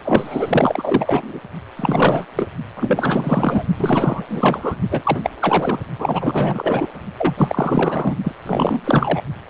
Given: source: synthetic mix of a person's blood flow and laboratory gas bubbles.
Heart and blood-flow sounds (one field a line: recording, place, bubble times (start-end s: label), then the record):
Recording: Doppler ultrasound of blood flow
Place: precordium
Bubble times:
0.02-1.40 s: bubbles
1.77-2.25 s: bubbles
2.35-2.46 s: bubbles
2.77-3.67 s: bubbles
3.77-4.23 s: bubbles
4.28-4.76 s: bubbles
4.90-5.20 s: bubbles
5.23-5.30 s: bubbles
5.41-5.79 s: bubbles
5.98-6.88 s: bubbles
7.17-8.15 s: bubbles
8.24-8.32 s: bubbles
8.46-8.81 s: bubbles
8.84-9.22 s: bubbles
9.47-9.50 s: bubbles
From the record:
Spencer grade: 4 (maximum detectable bubble signal sounding continuously throughout systole and diastole of every cardiac period, and overriding the amplitude of the normal cardiac signals)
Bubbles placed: only in the low amplitude regions of the cardiac cycle